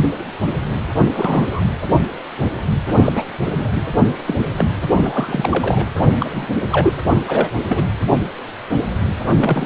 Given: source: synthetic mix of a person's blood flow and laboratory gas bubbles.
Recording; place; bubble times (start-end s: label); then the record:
Doppler ultrasound of blood flow; precordium
1.02-1.60 s: bubbles
3.01-3.12 s: bubbles
3.15-3.22 s: bubbles
3.57-3.69 s: bubbles
3.75-3.84 s: bubbles
4.27-4.34 s: bubbles
4.38-4.44 s: bubbles
4.57-4.70 s: bubbles
4.95-5.85 s: bubbles
6.20-6.46 s: bubbles
6.71-6.96 s: bubbles
7.27-7.49 s: bubbles
7.68-7.83 s: bubbles
9.29-9.66 s: bubbles
From the record:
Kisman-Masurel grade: 232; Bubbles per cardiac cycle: several, 3 to 8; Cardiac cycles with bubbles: 50 to 99%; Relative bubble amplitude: moderate (0.250 to 0.450); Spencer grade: 3 (all of the cardiac periods contain showers or single bubble signals, but not dominating or overriding the cardiac motion signals); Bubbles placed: anywhere in the cardiac cycle